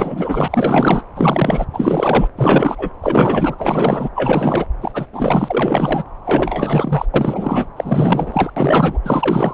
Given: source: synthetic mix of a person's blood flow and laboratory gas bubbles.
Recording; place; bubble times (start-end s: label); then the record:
Doppler ultrasound of blood flow; subclavian vein
0.00-1.03 s: bubbles
1.15-1.66 s: bubbles
1.73-2.28 s: bubbles
2.36-2.90 s: bubbles
3.01-3.56 s: bubbles
3.58-4.09 s: bubbles
4.15-4.66 s: bubbles
4.81-5.06 s: bubbles
5.12-6.04 s: bubbles
6.25-7.05 s: bubbles
7.13-7.66 s: bubbles
7.77-8.50 s: bubbles
8.56-9.00 s: bubbles
9.04-9.54 s: bubbles
From the record:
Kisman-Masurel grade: 444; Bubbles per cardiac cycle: continuous sound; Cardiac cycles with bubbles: 100%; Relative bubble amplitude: maximal (0.775 to 0.999); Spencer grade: 4 (maximum detectable bubble signal sounding continuously throughout systole and diastole of every cardiac period, and overriding the amplitude of the normal cardiac signals); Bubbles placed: anywhere in the cardiac cycle